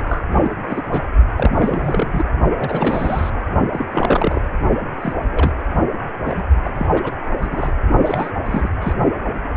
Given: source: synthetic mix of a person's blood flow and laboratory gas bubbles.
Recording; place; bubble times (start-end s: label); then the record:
Doppler ultrasound of blood flow; precordium
0.08-0.23 s: bubbles
0.31-0.84 s: bubbles
0.91-1.01 s: bubbles
1.38-2.24 s: bubbles
2.56-3.30 s: bubbles
3.73-3.85 s: bubbles
3.90-4.42 s: bubbles
5.00-5.13 s: bubbles
5.32-5.54 s: bubbles
6.24-6.44 s: bubbles
6.64-6.71 s: bubbles
6.74-6.88 s: bubbles
6.94-7.12 s: bubbles
7.42-7.72 s: bubbles
8.04-8.32 s: bubbles
8.45-8.70 s: bubbles
8.81-8.93 s: bubbles
From the record:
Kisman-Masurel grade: 242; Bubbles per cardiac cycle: several, 3 to 8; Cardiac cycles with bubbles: 100%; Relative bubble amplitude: moderate (0.250 to 0.450); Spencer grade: 3 (all of the cardiac periods contain showers or single bubble signals, but not dominating or overriding the cardiac motion signals); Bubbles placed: only in the low amplitude regions of the cardiac cycle